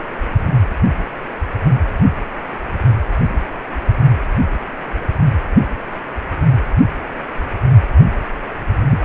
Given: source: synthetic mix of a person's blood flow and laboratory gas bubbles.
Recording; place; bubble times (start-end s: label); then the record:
Doppler ultrasound of blood flow; precordium
8.90-9.00 s: bubbles
From the record:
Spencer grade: 1 (occasional bubble signal discernible with the cardiac motion signal, with majority of cardiac periods free of bubbles); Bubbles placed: anywhere in the cardiac cycle